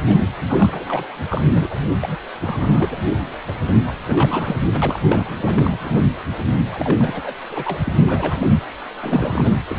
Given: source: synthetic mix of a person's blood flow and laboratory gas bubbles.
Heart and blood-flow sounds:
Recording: Doppler ultrasound of blood flow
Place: precordium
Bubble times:
0.07-0.17 s: bubbles
0.41-1.07 s: bubbles
1.26-1.81 s: bubbles
2.01-2.16 s: bubbles
2.41-3.03 s: bubbles
3.48-3.52 s: bubbles
3.67-3.77 s: bubbles
3.87-3.93 s: bubbles
4.05-4.57 s: bubbles
4.66-4.79 s: bubbles
4.82-5.00 s: bubbles
5.08-5.27 s: bubbles
5.37-6.09 s: bubbles
6.71-7.34 s: bubbles
7.49-7.80 s: bubbles
7.84-7.93 s: bubbles
8.08-8.55 s: bubbles
9.01-9.51 s: bubbles
9.69-9.78 s: bubbles
From the record:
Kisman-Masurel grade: 342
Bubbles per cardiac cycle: rolling drumbeat, 9 or more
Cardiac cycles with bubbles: 100%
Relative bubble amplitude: moderate (0.250 to 0.450)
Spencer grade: 3 (all of the cardiac periods contain showers or single bubble signals, but not dominating or overriding the cardiac motion signals)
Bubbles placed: anywhere in the cardiac cycle

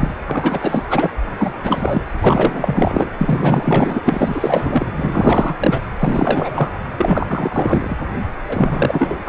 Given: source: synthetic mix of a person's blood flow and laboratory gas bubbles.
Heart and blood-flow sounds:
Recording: Doppler ultrasound of blood flow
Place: precordium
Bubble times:
0.00-0.14 s: bubbles
0.26-0.88 s: bubbles
0.90-1.10 s: bubbles
1.39-1.53 s: bubbles
1.63-2.03 s: bubbles
2.21-3.11 s: bubbles
3.18-4.02 s: bubbles
4.04-4.91 s: bubbles
4.96-5.55 s: bubbles
5.58-5.80 s: bubbles
6.00-6.79 s: bubbles
6.97-7.96 s: bubbles
8.48-9.17 s: bubbles
9.24-9.29 s: bubbles
From the record:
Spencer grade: 4 (maximum detectable bubble signal sounding continuously throughout systole and diastole of every cardiac period, and overriding the amplitude of the normal cardiac signals)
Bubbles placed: anywhere in the cardiac cycle

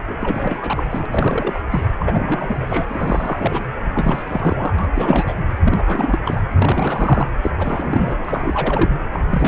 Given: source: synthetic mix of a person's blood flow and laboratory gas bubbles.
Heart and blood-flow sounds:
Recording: Doppler ultrasound of blood flow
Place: precordium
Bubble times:
0.07-0.85 s: bubbles
0.90-1.06 s: bubbles
1.10-1.63 s: bubbles
1.70-1.87 s: bubbles
1.99-2.85 s: bubbles
2.88-3.66 s: bubbles
3.94-4.74 s: bubbles
4.79-4.87 s: bubbles
4.95-5.46 s: bubbles
5.64-6.18 s: bubbles
6.25-6.43 s: bubbles
6.57-7.30 s: bubbles
7.42-7.50 s: bubbles
7.59-8.89 s: bubbles
9.13-9.19 s: bubbles
9.30-9.47 s: bubbles
From the record:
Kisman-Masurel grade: 342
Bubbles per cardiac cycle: rolling drumbeat, 9 or more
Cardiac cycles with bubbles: 100%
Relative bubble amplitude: moderate (0.250 to 0.450)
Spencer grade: 3 (all of the cardiac periods contain showers or single bubble signals, but not dominating or overriding the cardiac motion signals)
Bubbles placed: anywhere in the cardiac cycle

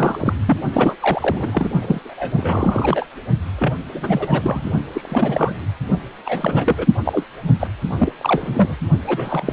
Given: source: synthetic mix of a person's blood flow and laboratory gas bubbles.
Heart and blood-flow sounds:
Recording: Doppler ultrasound of blood flow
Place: precordium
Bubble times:
0.00-0.35 s: bubbles
0.46-0.58 s: bubbles
0.73-0.96 s: bubbles
0.99-1.70 s: bubbles
1.81-1.99 s: bubbles
2.04-3.06 s: bubbles
3.58-3.74 s: bubbles
3.93-4.72 s: bubbles
4.94-5.55 s: bubbles
6.25-6.87 s: bubbles
7.04-7.24 s: bubbles
7.42-7.54 s: bubbles
7.59-7.67 s: bubbles
7.88-8.11 s: bubbles
8.21-8.76 s: bubbles
9.07-9.53 s: bubbles
From the record:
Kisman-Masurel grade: 343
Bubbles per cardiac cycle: rolling drumbeat, 9 or more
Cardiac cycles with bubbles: 100%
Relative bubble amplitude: loud (0.450 to 0.775)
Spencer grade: 3 (all of the cardiac periods contain showers or single bubble signals, but not dominating or overriding the cardiac motion signals)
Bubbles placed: only in the low amplitude regions of the cardiac cycle

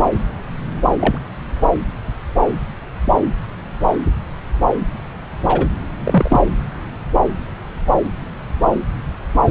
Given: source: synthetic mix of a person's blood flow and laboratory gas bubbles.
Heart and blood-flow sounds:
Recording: Doppler ultrasound of blood flow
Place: subclavian vein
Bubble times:
0.99-1.18 s: bubbles
5.48-5.67 s: bubbles
6.03-6.40 s: bubbles
From the record:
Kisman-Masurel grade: 123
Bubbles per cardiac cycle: 1 to 2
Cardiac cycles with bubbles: 10 to 50%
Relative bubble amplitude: loud (0.450 to 0.775)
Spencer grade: 2 (many but less than half of the cardiac periods contain bubble signals, singularly or in groups)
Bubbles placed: anywhere in the cardiac cycle

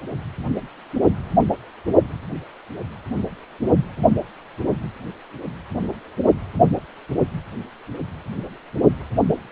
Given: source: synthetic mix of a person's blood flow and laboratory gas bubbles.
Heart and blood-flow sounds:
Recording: Doppler ultrasound of blood flow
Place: precordium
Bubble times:
no bubbles
From the record:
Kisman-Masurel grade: 000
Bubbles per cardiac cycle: 0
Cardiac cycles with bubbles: 0%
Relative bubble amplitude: no bubbles discernible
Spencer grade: 0 (complete lack of bubble signals)

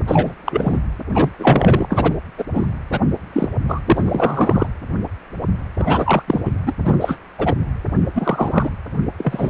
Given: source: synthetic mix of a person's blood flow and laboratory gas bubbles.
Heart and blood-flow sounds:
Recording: Doppler ultrasound of blood flow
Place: precordium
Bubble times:
0.07-0.33 s: bubbles
0.46-0.79 s: bubbles
1.14-1.30 s: bubbles
1.39-1.86 s: bubbles
1.89-2.14 s: bubbles
2.38-2.44 s: bubbles
2.54-2.68 s: bubbles
2.91-3.00 s: bubbles
3.33-3.49 s: bubbles
3.68-3.81 s: bubbles
3.86-4.67 s: bubbles
5.78-6.23 s: bubbles
6.28-6.41 s: bubbles
6.45-6.52 s: bubbles
6.66-6.73 s: bubbles
6.84-7.16 s: bubbles
7.38-7.54 s: bubbles
8.15-8.70 s: bubbles
9.17-9.50 s: bubbles
From the record:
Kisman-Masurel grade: 233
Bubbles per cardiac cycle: several, 3 to 8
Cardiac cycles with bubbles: 50 to 99%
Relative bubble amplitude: loud (0.450 to 0.775)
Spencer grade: 3 (all of the cardiac periods contain showers or single bubble signals, but not dominating or overriding the cardiac motion signals)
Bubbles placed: anywhere in the cardiac cycle

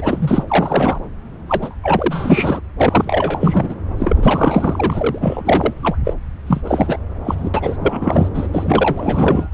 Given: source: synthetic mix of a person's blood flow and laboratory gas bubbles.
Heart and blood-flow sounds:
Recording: Doppler ultrasound of blood flow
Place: subclavian vein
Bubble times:
0.00-0.44 s: bubbles
0.47-0.98 s: bubbles
1.47-1.74 s: bubbles
1.82-2.61 s: bubbles
2.80-3.75 s: bubbles
3.96-5.98 s: bubbles
6.04-6.13 s: bubbles
6.46-6.61 s: bubbles
6.64-6.99 s: bubbles
7.24-7.50 s: bubbles
7.54-7.77 s: bubbles
7.79-8.29 s: bubbles
8.34-8.47 s: bubbles
8.52-9.47 s: bubbles
From the record:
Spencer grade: 4 (maximum detectable bubble signal sounding continuously throughout systole and diastole of every cardiac period, and overriding the amplitude of the normal cardiac signals)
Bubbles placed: anywhere in the cardiac cycle

